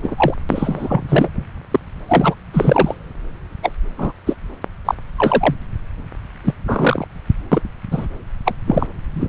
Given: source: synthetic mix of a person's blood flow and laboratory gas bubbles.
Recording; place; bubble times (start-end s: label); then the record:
Doppler ultrasound of blood flow; subclavian vein
0.02-0.34 s: bubbles
0.49-1.03 s: bubbles
1.08-1.29 s: bubbles
1.71-1.80 s: bubbles
2.07-2.35 s: bubbles
2.53-2.95 s: bubbles
3.62-3.71 s: bubbles
3.98-4.12 s: bubbles
4.26-4.34 s: bubbles
4.85-4.94 s: bubbles
5.17-5.55 s: bubbles
6.43-6.54 s: bubbles
6.67-7.08 s: bubbles
7.51-7.60 s: bubbles
7.91-8.07 s: bubbles
8.45-8.54 s: bubbles
8.67-8.87 s: bubbles
9.14-9.29 s: bubbles
From the record:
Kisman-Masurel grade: 243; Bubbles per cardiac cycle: several, 3 to 8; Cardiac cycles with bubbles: 100%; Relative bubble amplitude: loud (0.450 to 0.775); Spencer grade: 3 (all of the cardiac periods contain showers or single bubble signals, but not dominating or overriding the cardiac motion signals); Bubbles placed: anywhere in the cardiac cycle